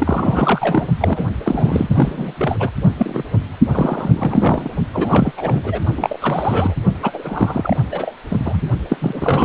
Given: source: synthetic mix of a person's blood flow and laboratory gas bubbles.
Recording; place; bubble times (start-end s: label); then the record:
Doppler ultrasound of blood flow; precordium
0.00-0.87 s: bubbles
0.99-1.30 s: bubbles
1.43-2.71 s: bubbles
2.98-3.23 s: bubbles
3.73-4.69 s: bubbles
4.93-5.31 s: bubbles
5.37-5.79 s: bubbles
5.97-6.75 s: bubbles
7.02-7.78 s: bubbles
7.91-8.15 s: bubbles
8.29-8.62 s: bubbles
8.89-8.97 s: bubbles
9.01-9.45 s: bubbles
From the record:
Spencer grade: 3 (all of the cardiac periods contain showers or single bubble signals, but not dominating or overriding the cardiac motion signals); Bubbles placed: only in the low amplitude regions of the cardiac cycle